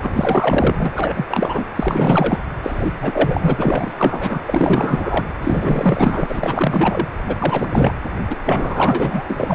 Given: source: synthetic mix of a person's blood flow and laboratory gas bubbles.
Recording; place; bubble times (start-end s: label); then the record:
Doppler ultrasound of blood flow; precordium
0.02-1.26 s: bubbles
1.29-1.65 s: bubbles
1.75-2.42 s: bubbles
2.63-2.92 s: bubbles
3.01-3.92 s: bubbles
3.98-4.42 s: bubbles
4.46-5.27 s: bubbles
5.42-7.08 s: bubbles
7.27-7.36 s: bubbles
7.38-7.95 s: bubbles
8.29-8.36 s: bubbles
8.45-9.55 s: bubbles
From the record:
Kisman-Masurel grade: 444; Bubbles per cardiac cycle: continuous sound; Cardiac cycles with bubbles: 100%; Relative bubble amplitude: maximal (0.775 to 0.999); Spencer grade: 4 (maximum detectable bubble signal sounding continuously throughout systole and diastole of every cardiac period, and overriding the amplitude of the normal cardiac signals); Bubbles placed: anywhere in the cardiac cycle